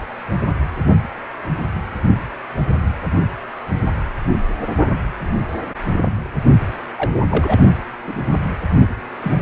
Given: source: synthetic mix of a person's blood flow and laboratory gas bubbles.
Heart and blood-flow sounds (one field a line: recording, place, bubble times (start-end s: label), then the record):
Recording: Doppler ultrasound of blood flow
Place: precordium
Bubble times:
6.96-7.11 s: bubbles
7.31-7.59 s: bubbles
8.07-8.14 s: bubbles
8.74-8.89 s: bubbles
9.21-9.32 s: bubbles
From the record:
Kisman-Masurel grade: 122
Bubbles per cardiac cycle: 1 to 2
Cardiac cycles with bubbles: 10 to 50%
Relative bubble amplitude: moderate (0.250 to 0.450)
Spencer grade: 2 (many but less than half of the cardiac periods contain bubble signals, singularly or in groups)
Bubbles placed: anywhere in the cardiac cycle